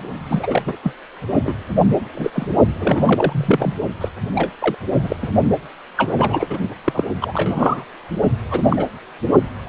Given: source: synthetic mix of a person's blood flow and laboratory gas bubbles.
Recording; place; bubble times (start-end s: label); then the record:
Doppler ultrasound of blood flow; precordium
0.29-0.62 s: bubbles
0.66-0.76 s: bubbles
0.83-0.95 s: bubbles
1.44-1.56 s: bubbles
2.15-2.31 s: bubbles
2.34-2.46 s: bubbles
2.80-3.74 s: bubbles
4.01-4.08 s: bubbles
4.35-4.51 s: bubbles
4.59-4.75 s: bubbles
5.01-5.17 s: bubbles
5.22-5.31 s: bubbles
5.97-6.58 s: bubbles
6.84-7.04 s: bubbles
7.21-7.85 s: bubbles
8.50-8.85 s: bubbles
9.65-9.69 s: bubbles
From the record:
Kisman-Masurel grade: 242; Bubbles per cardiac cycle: several, 3 to 8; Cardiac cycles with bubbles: 100%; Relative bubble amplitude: moderate (0.250 to 0.450); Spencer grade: 3 (all of the cardiac periods contain showers or single bubble signals, but not dominating or overriding the cardiac motion signals); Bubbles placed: only in the low amplitude regions of the cardiac cycle